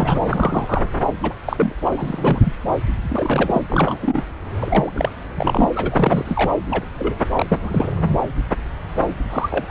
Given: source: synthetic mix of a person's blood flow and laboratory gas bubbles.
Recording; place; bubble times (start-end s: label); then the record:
Doppler ultrasound of blood flow; subclavian vein
0.00-0.21 s: bubbles
0.27-0.87 s: bubbles
1.23-1.33 s: bubbles
1.45-1.72 s: bubbles
1.84-2.54 s: bubbles
3.08-3.61 s: bubbles
3.70-4.23 s: bubbles
4.61-5.09 s: bubbles
5.34-5.69 s: bubbles
5.75-6.52 s: bubbles
6.70-6.84 s: bubbles
6.98-7.15 s: bubbles
7.36-7.58 s: bubbles
7.62-7.91 s: bubbles
9.30-9.65 s: bubbles
9.67-9.71 s: bubbles
From the record:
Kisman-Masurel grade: 232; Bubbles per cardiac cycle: several, 3 to 8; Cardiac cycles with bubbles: 50 to 99%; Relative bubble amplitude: moderate (0.250 to 0.450); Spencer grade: 3 (all of the cardiac periods contain showers or single bubble signals, but not dominating or overriding the cardiac motion signals); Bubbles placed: anywhere in the cardiac cycle